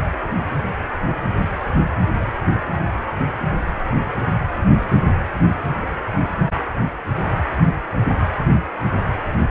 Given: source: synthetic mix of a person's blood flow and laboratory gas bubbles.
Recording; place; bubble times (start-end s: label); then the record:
Doppler ultrasound of blood flow; precordium
no bubbles
From the record:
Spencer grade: 0 (complete lack of bubble signals)